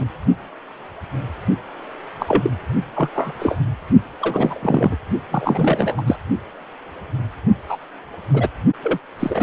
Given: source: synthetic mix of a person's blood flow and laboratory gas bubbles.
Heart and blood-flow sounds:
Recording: Doppler ultrasound of blood flow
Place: precordium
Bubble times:
0.00-0.05 s: bubbles
2.19-2.50 s: bubbles
2.95-3.09 s: bubbles
3.15-3.33 s: bubbles
3.39-3.56 s: bubbles
4.20-4.59 s: bubbles
4.62-4.96 s: bubbles
5.31-6.02 s: bubbles
6.07-6.16 s: bubbles
7.68-7.77 s: bubbles
8.34-8.48 s: bubbles
8.82-8.98 s: bubbles
9.20-9.43 s: bubbles
From the record:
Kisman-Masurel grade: 233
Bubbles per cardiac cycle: several, 3 to 8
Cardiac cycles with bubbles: 50 to 99%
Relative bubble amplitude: loud (0.450 to 0.775)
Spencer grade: 3 (all of the cardiac periods contain showers or single bubble signals, but not dominating or overriding the cardiac motion signals)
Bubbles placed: only in the low amplitude regions of the cardiac cycle

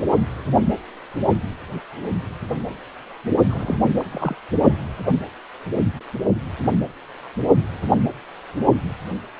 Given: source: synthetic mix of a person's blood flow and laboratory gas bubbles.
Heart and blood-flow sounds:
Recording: Doppler ultrasound of blood flow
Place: precordium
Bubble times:
3.49-3.77 s: bubbles
3.97-4.37 s: bubbles
From the record:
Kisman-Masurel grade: 221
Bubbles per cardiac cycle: several, 3 to 8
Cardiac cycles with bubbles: 10 to 50%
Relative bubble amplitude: barely perceptible (0.100 to 0.250)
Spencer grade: 2 (many but less than half of the cardiac periods contain bubble signals, singularly or in groups)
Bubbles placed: only in the low amplitude regions of the cardiac cycle

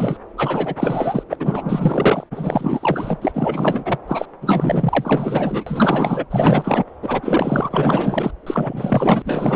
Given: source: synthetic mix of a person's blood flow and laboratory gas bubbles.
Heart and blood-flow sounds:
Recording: Doppler ultrasound of blood flow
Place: subclavian vein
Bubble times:
0.00-0.17 s: bubbles
0.37-1.23 s: bubbles
1.30-1.35 s: bubbles
1.40-2.24 s: bubbles
2.31-3.98 s: bubbles
4.07-4.25 s: bubbles
4.41-6.25 s: bubbles
6.30-6.84 s: bubbles
7.02-8.31 s: bubbles
8.46-9.22 s: bubbles
9.24-9.56 s: bubbles
From the record:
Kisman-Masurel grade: 444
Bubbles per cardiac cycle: continuous sound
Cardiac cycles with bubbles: 100%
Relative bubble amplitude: maximal (0.775 to 0.999)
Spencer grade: 4 (maximum detectable bubble signal sounding continuously throughout systole and diastole of every cardiac period, and overriding the amplitude of the normal cardiac signals)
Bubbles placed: anywhere in the cardiac cycle

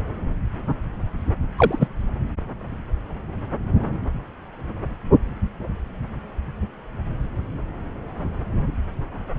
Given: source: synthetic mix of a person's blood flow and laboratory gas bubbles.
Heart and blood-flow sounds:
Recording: Doppler ultrasound of blood flow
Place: subclavian vein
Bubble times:
1.57-1.88 s: bubbles
From the record:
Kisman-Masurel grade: 113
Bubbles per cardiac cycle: 1 to 2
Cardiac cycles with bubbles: 1 to 10%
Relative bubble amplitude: loud (0.450 to 0.775)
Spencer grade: 1 (occasional bubble signal discernible with the cardiac motion signal, with majority of cardiac periods free of bubbles)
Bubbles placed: anywhere in the cardiac cycle

